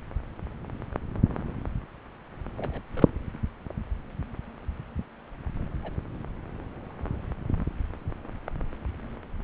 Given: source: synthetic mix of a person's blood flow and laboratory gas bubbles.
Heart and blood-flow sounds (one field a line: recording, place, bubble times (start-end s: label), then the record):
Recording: Doppler ultrasound of blood flow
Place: subclavian vein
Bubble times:
2.57-2.82 s: bubbles
2.95-3.19 s: bubbles
3.33-3.38 s: bubbles
5.59-5.68 s: bubbles
5.83-5.92 s: bubbles
From the record:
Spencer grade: 2 (many but less than half of the cardiac periods contain bubble signals, singularly or in groups)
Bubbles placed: anywhere in the cardiac cycle